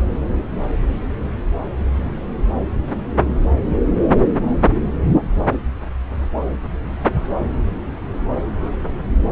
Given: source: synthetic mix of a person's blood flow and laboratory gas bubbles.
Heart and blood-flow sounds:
Doppler ultrasound of blood flow; subclavian vein
no bubbles
From the record:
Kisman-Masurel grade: 000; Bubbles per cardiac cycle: 0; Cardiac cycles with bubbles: 0%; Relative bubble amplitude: no bubbles discernible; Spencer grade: 0 (complete lack of bubble signals)

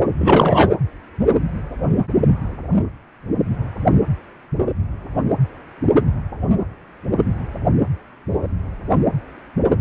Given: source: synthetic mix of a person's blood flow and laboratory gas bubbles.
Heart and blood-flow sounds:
Doppler ultrasound of blood flow; precordium
0.18-0.70 s: bubbles
From the record:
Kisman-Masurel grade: 213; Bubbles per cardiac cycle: several, 3 to 8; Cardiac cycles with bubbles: 1 to 10%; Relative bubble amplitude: loud (0.450 to 0.775); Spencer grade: 1 (occasional bubble signal discernible with the cardiac motion signal, with majority of cardiac periods free of bubbles); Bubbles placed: anywhere in the cardiac cycle

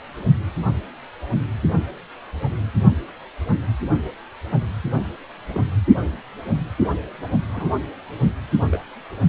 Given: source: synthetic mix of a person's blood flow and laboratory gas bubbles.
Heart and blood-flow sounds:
Doppler ultrasound of blood flow; precordium
5.48-5.62 s: bubbles
7.48-7.79 s: bubbles
8.71-8.83 s: bubbles
From the record:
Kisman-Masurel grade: 121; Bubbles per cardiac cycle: 1 to 2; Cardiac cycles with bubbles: 10 to 50%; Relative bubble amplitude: barely perceptible (0.100 to 0.250); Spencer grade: 2 (many but less than half of the cardiac periods contain bubble signals, singularly or in groups); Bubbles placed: only in the low amplitude regions of the cardiac cycle

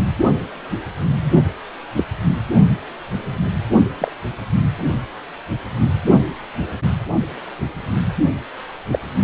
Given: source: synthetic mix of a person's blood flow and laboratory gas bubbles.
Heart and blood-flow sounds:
Doppler ultrasound of blood flow; precordium
1.96-2.05 s: bubbles
4.00-4.11 s: bubbles
8.92-8.99 s: bubbles
From the record:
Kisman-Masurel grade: 122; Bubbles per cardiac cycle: 1 to 2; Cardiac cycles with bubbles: 10 to 50%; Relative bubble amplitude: moderate (0.250 to 0.450); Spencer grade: 2 (many but less than half of the cardiac periods contain bubble signals, singularly or in groups); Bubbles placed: only in the low amplitude regions of the cardiac cycle

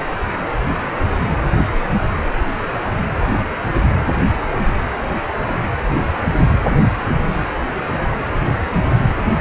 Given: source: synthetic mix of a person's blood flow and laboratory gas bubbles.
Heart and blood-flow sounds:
Doppler ultrasound of blood flow; precordium
6.71-6.76 s: bubbles
From the record:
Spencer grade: 1 (occasional bubble signal discernible with the cardiac motion signal, with majority of cardiac periods free of bubbles); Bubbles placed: anywhere in the cardiac cycle

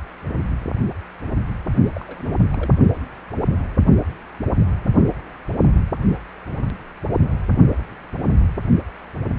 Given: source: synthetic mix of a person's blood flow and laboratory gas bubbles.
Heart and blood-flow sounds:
Doppler ultrasound of blood flow; precordium
1.96-2.43 s: bubbles
2.51-2.73 s: bubbles
From the record:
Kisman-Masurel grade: 211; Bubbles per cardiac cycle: several, 3 to 8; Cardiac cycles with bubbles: 1 to 10%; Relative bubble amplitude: barely perceptible (0.100 to 0.250); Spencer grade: 1 (occasional bubble signal discernible with the cardiac motion signal, with majority of cardiac periods free of bubbles); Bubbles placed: only in the low amplitude regions of the cardiac cycle

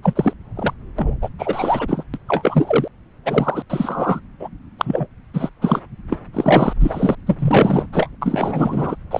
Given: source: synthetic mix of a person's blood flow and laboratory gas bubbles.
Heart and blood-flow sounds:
Doppler ultrasound of blood flow; subclavian vein
0.03-0.34 s: bubbles
0.55-0.73 s: bubbles
0.98-1.18 s: bubbles
1.21-1.29 s: bubbles
1.39-2.04 s: bubbles
2.13-2.17 s: bubbles
2.27-2.88 s: bubbles
3.25-3.62 s: bubbles
3.69-4.20 s: bubbles
4.40-4.48 s: bubbles
4.78-5.07 s: bubbles
5.33-5.50 s: bubbles
5.61-5.81 s: bubbles
6.10-6.17 s: bubbles
6.33-6.74 s: bubbles
6.80-7.15 s: bubbles
7.27-7.86 s: bubbles
7.92-8.09 s: bubbles
8.21-8.96 s: bubbles
9.11-9.20 s: bubbles
From the record:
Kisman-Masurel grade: 343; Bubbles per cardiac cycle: rolling drumbeat, 9 or more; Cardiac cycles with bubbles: 100%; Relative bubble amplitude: loud (0.450 to 0.775); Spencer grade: 3 (all of the cardiac periods contain showers or single bubble signals, but not dominating or overriding the cardiac motion signals); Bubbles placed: anywhere in the cardiac cycle

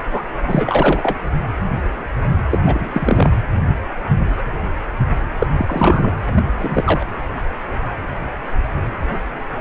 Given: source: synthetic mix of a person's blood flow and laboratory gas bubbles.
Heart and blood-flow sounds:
Doppler ultrasound of blood flow; precordium
0.11-0.22 s: bubbles
0.47-1.18 s: bubbles
2.51-2.61 s: bubbles
2.66-3.31 s: bubbles
5.38-5.47 s: bubbles
5.57-6.14 s: bubbles
6.35-6.44 s: bubbles
6.55-7.09 s: bubbles
From the record:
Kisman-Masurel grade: 222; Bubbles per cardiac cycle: several, 3 to 8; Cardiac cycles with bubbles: 10 to 50%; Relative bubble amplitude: moderate (0.250 to 0.450); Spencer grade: 2 (many but less than half of the cardiac periods contain bubble signals, singularly or in groups); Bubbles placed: anywhere in the cardiac cycle

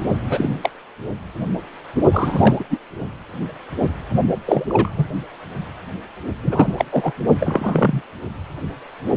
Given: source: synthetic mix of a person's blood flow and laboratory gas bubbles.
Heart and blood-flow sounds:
Doppler ultrasound of blood flow; precordium
0.29-0.70 s: bubbles
2.12-2.64 s: bubbles
2.69-2.78 s: bubbles
4.46-4.65 s: bubbles
4.69-5.05 s: bubbles
6.42-6.74 s: bubbles
6.77-6.85 s: bubbles
6.92-7.12 s: bubbles
7.39-8.01 s: bubbles
From the record:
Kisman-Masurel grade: 233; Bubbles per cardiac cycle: several, 3 to 8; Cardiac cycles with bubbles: 50 to 99%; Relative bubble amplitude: loud (0.450 to 0.775); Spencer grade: 3 (all of the cardiac periods contain showers or single bubble signals, but not dominating or overriding the cardiac motion signals); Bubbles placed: only in the low amplitude regions of the cardiac cycle

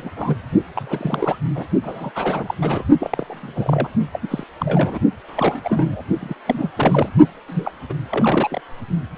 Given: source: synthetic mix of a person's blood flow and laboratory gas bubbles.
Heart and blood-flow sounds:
Doppler ultrasound of blood flow; precordium
0.00-0.10 s: bubbles
0.17-0.38 s: bubbles
0.75-1.40 s: bubbles
1.56-1.65 s: bubbles
1.83-2.11 s: bubbles
2.15-2.54 s: bubbles
2.62-2.85 s: bubbles
3.00-3.89 s: bubbles
4.12-4.19 s: bubbles
4.21-4.44 s: bubbles
4.58-4.98 s: bubbles
5.28-6.02 s: bubbles
6.21-6.34 s: bubbles
6.46-6.71 s: bubbles
6.76-7.11 s: bubbles
7.47-7.71 s: bubbles
7.89-7.93 s: bubbles
8.10-8.61 s: bubbles
From the record:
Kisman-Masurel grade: 342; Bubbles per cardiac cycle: rolling drumbeat, 9 or more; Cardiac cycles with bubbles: 100%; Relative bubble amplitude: moderate (0.250 to 0.450); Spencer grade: 3 (all of the cardiac periods contain showers or single bubble signals, but not dominating or overriding the cardiac motion signals); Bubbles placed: only in the low amplitude regions of the cardiac cycle

